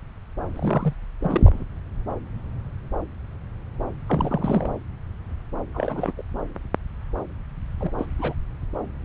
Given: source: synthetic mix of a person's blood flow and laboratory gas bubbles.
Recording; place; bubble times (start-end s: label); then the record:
Doppler ultrasound of blood flow; subclavian vein
0.55-0.94 s: bubbles
1.21-1.64 s: bubbles
4.08-4.71 s: bubbles
5.74-6.12 s: bubbles
6.18-6.21 s: bubbles
7.80-7.92 s: bubbles
7.98-8.06 s: bubbles
8.19-8.34 s: bubbles
From the record:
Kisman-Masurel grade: 221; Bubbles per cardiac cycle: several, 3 to 8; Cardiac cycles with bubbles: 10 to 50%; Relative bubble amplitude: barely perceptible (0.100 to 0.250); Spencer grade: 2 (many but less than half of the cardiac periods contain bubble signals, singularly or in groups); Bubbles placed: anywhere in the cardiac cycle